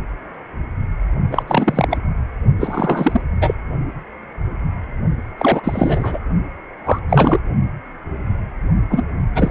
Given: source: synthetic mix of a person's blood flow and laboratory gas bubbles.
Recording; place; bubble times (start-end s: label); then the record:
Doppler ultrasound of blood flow; precordium
1.31-1.43 s: bubbles
1.48-1.88 s: bubbles
1.90-1.98 s: bubbles
2.60-3.21 s: bubbles
3.41-3.55 s: bubbles
5.38-5.61 s: bubbles
5.63-6.19 s: bubbles
6.86-6.99 s: bubbles
7.09-7.41 s: bubbles
8.89-9.03 s: bubbles
9.35-9.51 s: bubbles
From the record:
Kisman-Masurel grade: 333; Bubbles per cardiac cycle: rolling drumbeat, 9 or more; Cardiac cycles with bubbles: 50 to 99%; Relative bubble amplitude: loud (0.450 to 0.775); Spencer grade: 3 (all of the cardiac periods contain showers or single bubble signals, but not dominating or overriding the cardiac motion signals); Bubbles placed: only in the low amplitude regions of the cardiac cycle